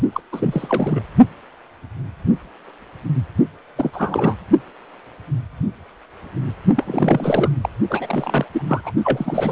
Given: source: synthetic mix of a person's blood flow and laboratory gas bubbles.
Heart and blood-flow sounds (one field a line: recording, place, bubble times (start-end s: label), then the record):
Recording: Doppler ultrasound of blood flow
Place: precordium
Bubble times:
0.12-0.20 s: bubbles
0.32-1.02 s: bubbles
3.75-4.35 s: bubbles
6.75-7.53 s: bubbles
7.62-7.69 s: bubbles
7.89-8.45 s: bubbles
8.53-8.91 s: bubbles
9.04-9.52 s: bubbles
From the record:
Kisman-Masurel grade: 332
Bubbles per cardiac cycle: rolling drumbeat, 9 or more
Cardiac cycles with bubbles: 50 to 99%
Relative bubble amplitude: moderate (0.250 to 0.450)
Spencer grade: 3 (all of the cardiac periods contain showers or single bubble signals, but not dominating or overriding the cardiac motion signals)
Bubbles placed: only in the low amplitude regions of the cardiac cycle